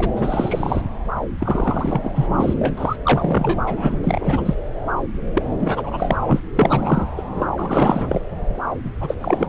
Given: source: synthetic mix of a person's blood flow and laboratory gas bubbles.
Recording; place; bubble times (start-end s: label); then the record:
Doppler ultrasound of blood flow; subclavian vein
0.00-0.10 s: bubbles
0.17-0.81 s: bubbles
1.38-2.27 s: bubbles
2.37-2.96 s: bubbles
3.04-3.59 s: bubbles
3.66-3.98 s: bubbles
4.03-4.55 s: bubbles
5.35-5.43 s: bubbles
5.60-6.17 s: bubbles
6.27-6.40 s: bubbles
6.55-7.06 s: bubbles
7.17-7.23 s: bubbles
7.35-7.47 s: bubbles
7.58-8.21 s: bubbles
8.84-8.91 s: bubbles
9.00-9.15 s: bubbles
9.21-9.47 s: bubbles
From the record:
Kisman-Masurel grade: 343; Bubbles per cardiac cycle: rolling drumbeat, 9 or more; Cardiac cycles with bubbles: 100%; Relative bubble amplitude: loud (0.450 to 0.775); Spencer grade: 3 (all of the cardiac periods contain showers or single bubble signals, but not dominating or overriding the cardiac motion signals); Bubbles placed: anywhere in the cardiac cycle